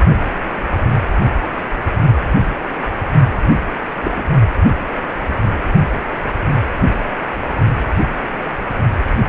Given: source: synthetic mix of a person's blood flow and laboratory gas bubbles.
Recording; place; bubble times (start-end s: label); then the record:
Doppler ultrasound of blood flow; precordium
4.03-4.12 s: bubbles
4.15-4.23 s: bubbles
From the record:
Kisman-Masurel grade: 112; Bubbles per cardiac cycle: 1 to 2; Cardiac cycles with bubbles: 1 to 10%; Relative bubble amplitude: moderate (0.250 to 0.450); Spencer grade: 1 (occasional bubble signal discernible with the cardiac motion signal, with majority of cardiac periods free of bubbles); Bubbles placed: only in the low amplitude regions of the cardiac cycle